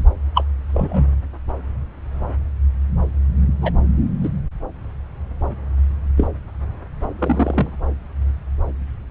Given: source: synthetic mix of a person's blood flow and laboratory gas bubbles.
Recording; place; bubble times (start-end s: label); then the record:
Doppler ultrasound of blood flow; subclavian vein
0.35-0.43 s: bubbles
0.73-1.06 s: bubbles
3.61-3.72 s: bubbles
4.24-4.29 s: bubbles
6.17-6.28 s: bubbles
7.19-7.71 s: bubbles
From the record:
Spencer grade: 2 (many but less than half of the cardiac periods contain bubble signals, singularly or in groups); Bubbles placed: anywhere in the cardiac cycle